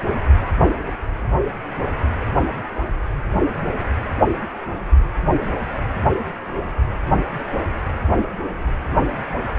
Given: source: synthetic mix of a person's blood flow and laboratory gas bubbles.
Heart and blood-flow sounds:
Doppler ultrasound of blood flow; precordium
no bubbles
From the record:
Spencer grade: 0 (complete lack of bubble signals)

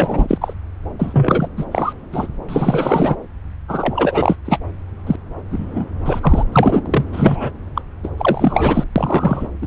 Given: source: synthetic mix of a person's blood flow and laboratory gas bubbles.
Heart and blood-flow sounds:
Doppler ultrasound of blood flow; subclavian vein
0.00-0.38 s: bubbles
0.41-0.53 s: bubbles
0.99-1.47 s: bubbles
1.57-1.65 s: bubbles
1.71-1.93 s: bubbles
2.12-2.28 s: bubbles
2.48-3.16 s: bubbles
3.68-4.36 s: bubbles
4.45-4.58 s: bubbles
5.07-5.16 s: bubbles
5.50-6.44 s: bubbles
6.52-6.81 s: bubbles
6.85-7.04 s: bubbles
7.12-7.50 s: bubbles
7.75-7.82 s: bubbles
8.03-8.09 s: bubbles
8.17-8.84 s: bubbles
8.96-9.48 s: bubbles
9.62-9.67 s: bubbles
From the record:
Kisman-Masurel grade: 343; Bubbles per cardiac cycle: rolling drumbeat, 9 or more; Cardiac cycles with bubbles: 100%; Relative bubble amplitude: loud (0.450 to 0.775); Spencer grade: 3 (all of the cardiac periods contain showers or single bubble signals, but not dominating or overriding the cardiac motion signals); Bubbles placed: anywhere in the cardiac cycle

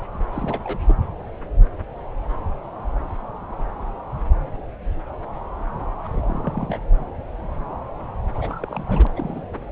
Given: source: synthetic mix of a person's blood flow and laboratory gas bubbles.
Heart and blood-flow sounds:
Doppler ultrasound of blood flow; subclavian vein
0.33-0.96 s: bubbles
6.04-6.08 s: bubbles
6.12-6.79 s: bubbles
8.35-9.07 s: bubbles
9.15-9.51 s: bubbles
From the record:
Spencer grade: 2 (many but less than half of the cardiac periods contain bubble signals, singularly or in groups); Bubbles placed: anywhere in the cardiac cycle

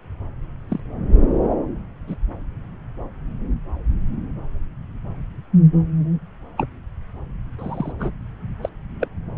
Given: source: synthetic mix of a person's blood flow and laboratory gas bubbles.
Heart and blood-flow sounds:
Doppler ultrasound of blood flow; subclavian vein
0.68-0.80 s: bubbles
2.07-2.17 s: bubbles
6.57-6.67 s: bubbles
7.58-7.92 s: bubbles
7.98-8.12 s: bubbles
8.62-8.69 s: bubbles
9.00-9.08 s: bubbles
From the record:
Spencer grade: 2 (many but less than half of the cardiac periods contain bubble signals, singularly or in groups); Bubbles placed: anywhere in the cardiac cycle

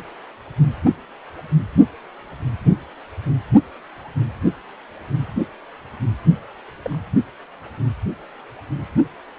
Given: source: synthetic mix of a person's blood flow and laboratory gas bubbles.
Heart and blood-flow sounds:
Doppler ultrasound of blood flow; precordium
6.82-6.98 s: bubbles
From the record:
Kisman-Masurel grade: 121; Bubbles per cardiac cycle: 1 to 2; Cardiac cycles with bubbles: 10 to 50%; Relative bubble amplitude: barely perceptible (0.100 to 0.250); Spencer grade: 2 (many but less than half of the cardiac periods contain bubble signals, singularly or in groups); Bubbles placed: only in the low amplitude regions of the cardiac cycle

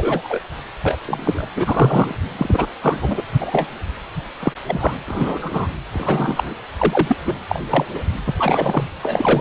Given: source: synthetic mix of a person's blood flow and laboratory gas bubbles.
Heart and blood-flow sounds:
Doppler ultrasound of blood flow; precordium
0.00-0.39 s: bubbles
0.83-0.96 s: bubbles
1.05-1.48 s: bubbles
1.56-2.15 s: bubbles
2.38-2.66 s: bubbles
2.81-3.22 s: bubbles
3.40-3.67 s: bubbles
4.40-4.53 s: bubbles
4.65-4.99 s: bubbles
5.07-5.67 s: bubbles
5.93-6.54 s: bubbles
6.78-7.16 s: bubbles
7.25-7.34 s: bubbles
7.49-7.59 s: bubbles
7.69-7.84 s: bubbles
7.94-7.99 s: bubbles
8.26-8.33 s: bubbles
8.38-8.89 s: bubbles
9.03-9.41 s: bubbles
From the record:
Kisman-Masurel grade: 242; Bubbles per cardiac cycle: several, 3 to 8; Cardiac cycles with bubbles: 100%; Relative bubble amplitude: moderate (0.250 to 0.450); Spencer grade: 3 (all of the cardiac periods contain showers or single bubble signals, but not dominating or overriding the cardiac motion signals); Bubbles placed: anywhere in the cardiac cycle

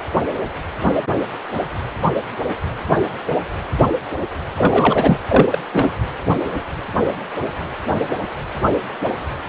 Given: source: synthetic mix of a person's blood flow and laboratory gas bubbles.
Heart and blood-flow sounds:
Doppler ultrasound of blood flow; precordium
4.58-5.19 s: bubbles
5.27-5.58 s: bubbles
5.72-5.92 s: bubbles
From the record:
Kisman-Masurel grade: 223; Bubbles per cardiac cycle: several, 3 to 8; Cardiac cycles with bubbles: 10 to 50%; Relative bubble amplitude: loud (0.450 to 0.775); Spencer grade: 2 (many but less than half of the cardiac periods contain bubble signals, singularly or in groups); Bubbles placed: anywhere in the cardiac cycle

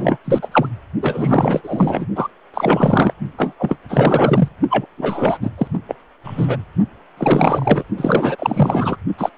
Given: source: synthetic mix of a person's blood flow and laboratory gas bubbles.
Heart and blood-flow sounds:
Doppler ultrasound of blood flow; precordium
0.00-0.17 s: bubbles
0.24-0.48 s: bubbles
0.52-0.68 s: bubbles
1.02-2.06 s: bubbles
2.16-2.28 s: bubbles
2.54-3.13 s: bubbles
3.38-3.53 s: bubbles
3.59-3.77 s: bubbles
3.89-4.48 s: bubbles
4.70-4.86 s: bubbles
4.97-5.38 s: bubbles
5.41-5.49 s: bubbles
5.58-5.67 s: bubbles
5.73-5.79 s: bubbles
5.88-5.95 s: bubbles
6.23-6.58 s: bubbles
7.17-7.83 s: bubbles
7.96-8.36 s: bubbles
8.38-8.98 s: bubbles
9.18-9.29 s: bubbles
From the record:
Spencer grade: 4 (maximum detectable bubble signal sounding continuously throughout systole and diastole of every cardiac period, and overriding the amplitude of the normal cardiac signals); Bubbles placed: only in the low amplitude regions of the cardiac cycle

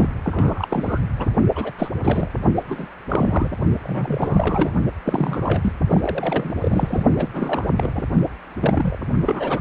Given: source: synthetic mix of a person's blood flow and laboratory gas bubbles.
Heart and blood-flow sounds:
Doppler ultrasound of blood flow; precordium
0.00-0.07 s: bubbles
0.24-0.99 s: bubbles
1.18-1.28 s: bubbles
1.55-1.72 s: bubbles
1.78-1.89 s: bubbles
2.04-2.29 s: bubbles
2.56-2.63 s: bubbles
2.68-2.87 s: bubbles
3.08-3.56 s: bubbles
3.82-4.71 s: bubbles
5.05-5.73 s: bubbles
5.90-6.53 s: bubbles
6.61-7.03 s: bubbles
7.17-7.29 s: bubbles
7.33-7.69 s: bubbles
7.78-8.05 s: bubbles
8.60-8.96 s: bubbles
9.20-9.61 s: bubbles
From the record:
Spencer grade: 3 (all of the cardiac periods contain showers or single bubble signals, but not dominating or overriding the cardiac motion signals); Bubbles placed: only in the low amplitude regions of the cardiac cycle

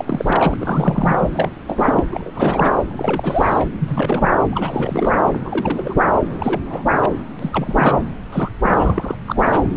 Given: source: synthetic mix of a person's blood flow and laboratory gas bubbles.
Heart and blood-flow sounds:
Doppler ultrasound of blood flow; subclavian vein
0.00-0.56 s: bubbles
0.60-1.52 s: bubbles
1.68-2.02 s: bubbles
2.10-2.31 s: bubbles
2.33-2.75 s: bubbles
2.91-3.65 s: bubbles
3.80-4.29 s: bubbles
4.51-5.17 s: bubbles
5.25-5.40 s: bubbles
5.44-5.93 s: bubbles
6.39-6.60 s: bubbles
6.65-6.84 s: bubbles
7.02-7.09 s: bubbles
7.39-8.00 s: bubbles
8.32-8.49 s: bubbles
8.63-9.15 s: bubbles
9.28-9.67 s: bubbles
9.71-9.74 s: bubbles
From the record:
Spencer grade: 3 (all of the cardiac periods contain showers or single bubble signals, but not dominating or overriding the cardiac motion signals); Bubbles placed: anywhere in the cardiac cycle

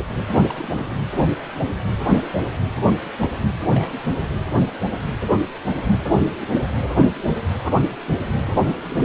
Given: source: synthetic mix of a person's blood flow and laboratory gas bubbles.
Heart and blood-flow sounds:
Doppler ultrasound of blood flow; precordium
0.28-0.42 s: bubbles
0.49-0.55 s: bubbles
0.58-1.03 s: bubbles
3.72-3.92 s: bubbles
4.21-4.25 s: bubbles
6.08-6.59 s: bubbles
8.44-8.81 s: bubbles
From the record:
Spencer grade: 2 (many but less than half of the cardiac periods contain bubble signals, singularly or in groups); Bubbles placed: anywhere in the cardiac cycle

